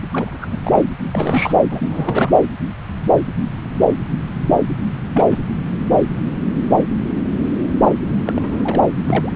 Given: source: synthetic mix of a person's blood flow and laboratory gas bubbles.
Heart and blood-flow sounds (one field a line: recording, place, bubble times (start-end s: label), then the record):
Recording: Doppler ultrasound of blood flow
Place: subclavian vein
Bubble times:
0.13-0.38 s: bubbles
0.41-0.48 s: bubbles
0.51-0.58 s: bubbles
0.64-0.89 s: bubbles
1.12-1.54 s: bubbles
1.71-2.31 s: bubbles
5.14-5.25 s: bubbles
5.31-5.39 s: bubbles
8.24-8.82 s: bubbles
9.05-9.32 s: bubbles
From the record:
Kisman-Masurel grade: 232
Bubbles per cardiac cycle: several, 3 to 8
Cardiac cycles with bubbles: 50 to 99%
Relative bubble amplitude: moderate (0.250 to 0.450)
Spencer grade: 3 (all of the cardiac periods contain showers or single bubble signals, but not dominating or overriding the cardiac motion signals)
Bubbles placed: anywhere in the cardiac cycle